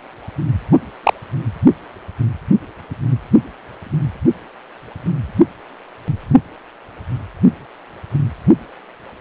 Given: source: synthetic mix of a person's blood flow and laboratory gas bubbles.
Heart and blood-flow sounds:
Doppler ultrasound of blood flow; precordium
0.72-0.79 s: bubbles
1.03-1.14 s: bubbles
From the record:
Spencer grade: 1 (occasional bubble signal discernible with the cardiac motion signal, with majority of cardiac periods free of bubbles); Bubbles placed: anywhere in the cardiac cycle

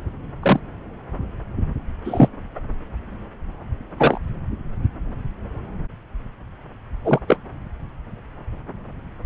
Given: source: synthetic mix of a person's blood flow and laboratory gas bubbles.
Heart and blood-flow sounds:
Doppler ultrasound of blood flow; subclavian vein
0.42-0.60 s: bubbles
2.04-2.29 s: bubbles
3.98-4.17 s: bubbles
7.04-7.19 s: bubbles
7.27-7.38 s: bubbles
From the record:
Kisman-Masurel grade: 123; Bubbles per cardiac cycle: 1 to 2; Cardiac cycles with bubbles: 10 to 50%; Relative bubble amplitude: loud (0.450 to 0.775); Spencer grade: 2 (many but less than half of the cardiac periods contain bubble signals, singularly or in groups); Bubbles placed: anywhere in the cardiac cycle

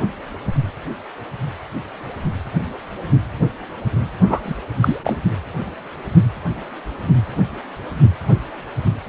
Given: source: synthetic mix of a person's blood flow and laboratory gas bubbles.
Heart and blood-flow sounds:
Doppler ultrasound of blood flow; precordium
4.28-4.41 s: bubbles
4.43-4.55 s: bubbles
4.81-5.00 s: bubbles
5.03-5.17 s: bubbles
From the record:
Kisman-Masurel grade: 213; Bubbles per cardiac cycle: several, 3 to 8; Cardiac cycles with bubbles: 1 to 10%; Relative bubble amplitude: loud (0.450 to 0.775); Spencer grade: 1 (occasional bubble signal discernible with the cardiac motion signal, with majority of cardiac periods free of bubbles); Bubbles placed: only in the low amplitude regions of the cardiac cycle

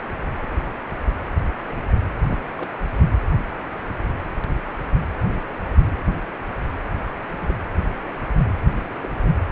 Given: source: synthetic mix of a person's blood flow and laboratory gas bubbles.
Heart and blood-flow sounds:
Doppler ultrasound of blood flow; precordium
0.51-0.55 s: bubbles
0.93-1.02 s: bubbles
2.31-2.37 s: bubbles
2.58-2.71 s: bubbles
6.99-7.07 s: bubbles
7.40-7.54 s: bubbles
9.01-9.07 s: bubbles
From the record:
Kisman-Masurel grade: 121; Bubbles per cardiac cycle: 1 to 2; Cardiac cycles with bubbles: 10 to 50%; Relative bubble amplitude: barely perceptible (0.100 to 0.250); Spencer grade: 2 (many but less than half of the cardiac periods contain bubble signals, singularly or in groups); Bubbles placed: anywhere in the cardiac cycle

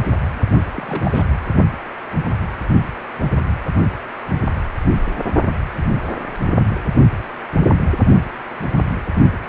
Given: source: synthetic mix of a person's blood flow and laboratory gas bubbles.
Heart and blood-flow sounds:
Doppler ultrasound of blood flow; precordium
0.49-0.59 s: bubbles
0.74-1.23 s: bubbles
From the record:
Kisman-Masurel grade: 221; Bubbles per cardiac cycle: several, 3 to 8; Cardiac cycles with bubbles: 10 to 50%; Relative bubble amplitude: barely perceptible (0.100 to 0.250); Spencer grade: 2 (many but less than half of the cardiac periods contain bubble signals, singularly or in groups); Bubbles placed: only in the low amplitude regions of the cardiac cycle

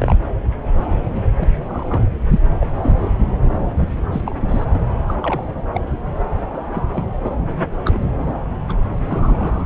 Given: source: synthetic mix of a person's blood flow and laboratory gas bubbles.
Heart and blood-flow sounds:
Doppler ultrasound of blood flow; subclavian vein
0.00-0.16 s: bubbles
1.14-1.22 s: bubbles
1.35-1.49 s: bubbles
1.68-2.08 s: bubbles
2.30-2.40 s: bubbles
2.60-2.65 s: bubbles
2.83-3.08 s: bubbles
4.11-4.21 s: bubbles
4.25-4.35 s: bubbles
4.49-4.64 s: bubbles
4.73-4.78 s: bubbles
5.07-5.16 s: bubbles
5.21-5.43 s: bubbles
5.73-5.80 s: bubbles
6.53-6.60 s: bubbles
6.72-6.83 s: bubbles
6.93-7.05 s: bubbles
7.24-7.31 s: bubbles
7.85-8.09 s: bubbles
8.69-8.73 s: bubbles
9.08-9.66 s: bubbles
From the record:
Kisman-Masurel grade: 232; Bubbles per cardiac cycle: several, 3 to 8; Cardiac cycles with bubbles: 50 to 99%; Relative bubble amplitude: moderate (0.250 to 0.450); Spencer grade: 3 (all of the cardiac periods contain showers or single bubble signals, but not dominating or overriding the cardiac motion signals); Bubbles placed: anywhere in the cardiac cycle

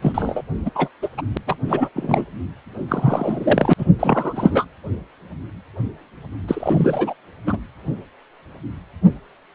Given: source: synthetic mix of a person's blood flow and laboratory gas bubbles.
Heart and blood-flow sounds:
Doppler ultrasound of blood flow; precordium
0.02-0.42 s: bubbles
0.65-0.70 s: bubbles
0.75-0.89 s: bubbles
1.02-1.09 s: bubbles
1.17-1.22 s: bubbles
1.34-1.38 s: bubbles
1.47-1.56 s: bubbles
1.67-1.89 s: bubbles
1.96-2.25 s: bubbles
2.88-3.73 s: bubbles
3.78-3.86 s: bubbles
3.98-4.65 s: bubbles
6.47-7.14 s: bubbles
7.46-7.58 s: bubbles
From the record:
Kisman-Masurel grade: 333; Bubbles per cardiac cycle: rolling drumbeat, 9 or more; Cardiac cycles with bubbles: 50 to 99%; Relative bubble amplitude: loud (0.450 to 0.775); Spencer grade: 3 (all of the cardiac periods contain showers or single bubble signals, but not dominating or overriding the cardiac motion signals); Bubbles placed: anywhere in the cardiac cycle

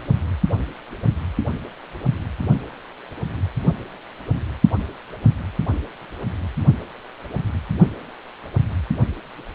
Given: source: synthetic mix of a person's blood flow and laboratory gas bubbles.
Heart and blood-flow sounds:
Doppler ultrasound of blood flow; precordium
no bubbles
From the record:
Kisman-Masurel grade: 000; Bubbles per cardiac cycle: 0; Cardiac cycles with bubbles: 0%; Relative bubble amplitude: no bubbles discernible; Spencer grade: 0 (complete lack of bubble signals)

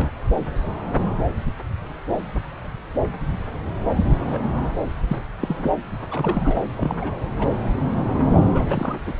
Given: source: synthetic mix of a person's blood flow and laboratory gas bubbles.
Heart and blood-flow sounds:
Doppler ultrasound of blood flow; subclavian vein
0.00-0.09 s: bubbles
4.09-4.61 s: bubbles
5.07-5.17 s: bubbles
5.40-5.71 s: bubbles
6.11-6.63 s: bubbles
6.77-7.15 s: bubbles
7.39-7.49 s: bubbles
8.51-8.98 s: bubbles
9.06-9.13 s: bubbles
From the record:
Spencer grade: 2 (many but less than half of the cardiac periods contain bubble signals, singularly or in groups); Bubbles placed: anywhere in the cardiac cycle

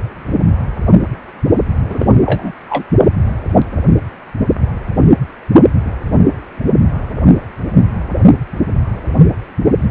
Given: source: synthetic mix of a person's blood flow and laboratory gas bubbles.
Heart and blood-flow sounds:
Doppler ultrasound of blood flow; precordium
1.89-2.05 s: bubbles
2.25-2.52 s: bubbles
2.69-2.84 s: bubbles
From the record:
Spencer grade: 1 (occasional bubble signal discernible with the cardiac motion signal, with majority of cardiac periods free of bubbles); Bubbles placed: only in the low amplitude regions of the cardiac cycle

